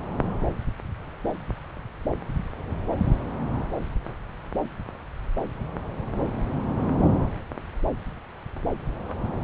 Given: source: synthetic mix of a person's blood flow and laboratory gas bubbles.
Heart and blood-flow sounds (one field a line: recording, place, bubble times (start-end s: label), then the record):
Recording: Doppler ultrasound of blood flow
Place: subclavian vein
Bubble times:
no bubbles
From the record:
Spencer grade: 0 (complete lack of bubble signals)